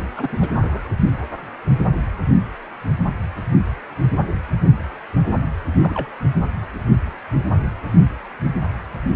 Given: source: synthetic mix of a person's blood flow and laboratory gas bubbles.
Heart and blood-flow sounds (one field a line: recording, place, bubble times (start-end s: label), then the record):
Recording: Doppler ultrasound of blood flow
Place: precordium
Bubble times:
0.00-0.11 s: bubbles
0.17-0.89 s: bubbles
5.79-6.08 s: bubbles
From the record:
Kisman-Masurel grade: 221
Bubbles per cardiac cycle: several, 3 to 8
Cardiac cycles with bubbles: 10 to 50%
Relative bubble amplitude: barely perceptible (0.100 to 0.250)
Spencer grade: 2 (many but less than half of the cardiac periods contain bubble signals, singularly or in groups)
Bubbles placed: only in the low amplitude regions of the cardiac cycle